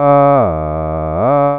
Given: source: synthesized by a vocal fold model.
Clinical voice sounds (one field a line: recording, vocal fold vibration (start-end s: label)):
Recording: sustained vowel that changes in the middle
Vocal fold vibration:
0.00-0.33 s: 142.0 Hz, open quotient 0.46
0.53-1.13 s: 78.4 Hz, open quotient 0.45
1.33-1.59 s: 142.0 Hz, open quotient 0.46